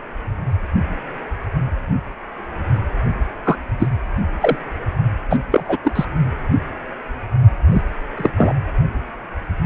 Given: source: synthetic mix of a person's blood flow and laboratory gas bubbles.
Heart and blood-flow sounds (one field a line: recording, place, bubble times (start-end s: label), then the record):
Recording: Doppler ultrasound of blood flow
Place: precordium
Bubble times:
3.44-3.56 s: bubbles
3.79-3.88 s: bubbles
4.41-4.56 s: bubbles
5.30-5.39 s: bubbles
5.51-5.78 s: bubbles
5.84-5.92 s: bubbles
5.95-6.05 s: bubbles
7.71-7.83 s: bubbles
8.17-8.30 s: bubbles
8.37-8.53 s: bubbles
From the record:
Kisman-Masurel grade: 223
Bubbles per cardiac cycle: several, 3 to 8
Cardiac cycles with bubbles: 10 to 50%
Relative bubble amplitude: loud (0.450 to 0.775)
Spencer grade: 2 (many but less than half of the cardiac periods contain bubble signals, singularly or in groups)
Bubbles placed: only in the low amplitude regions of the cardiac cycle